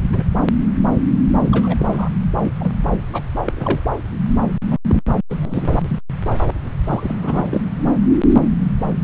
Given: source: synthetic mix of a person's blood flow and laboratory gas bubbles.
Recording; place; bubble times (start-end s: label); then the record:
Doppler ultrasound of blood flow; subclavian vein
0.12-0.23 s: bubbles
1.42-2.09 s: bubbles
2.42-2.52 s: bubbles
2.60-2.73 s: bubbles
3.12-3.23 s: bubbles
3.44-3.52 s: bubbles
3.55-3.79 s: bubbles
3.92-3.98 s: bubbles
4.70-4.78 s: bubbles
4.88-5.01 s: bubbles
5.29-6.00 s: bubbles
6.87-7.16 s: bubbles
7.21-7.61 s: bubbles
From the record:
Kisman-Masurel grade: 232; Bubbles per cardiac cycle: several, 3 to 8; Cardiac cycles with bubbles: 50 to 99%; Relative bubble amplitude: moderate (0.250 to 0.450); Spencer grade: 3 (all of the cardiac periods contain showers or single bubble signals, but not dominating or overriding the cardiac motion signals); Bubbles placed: anywhere in the cardiac cycle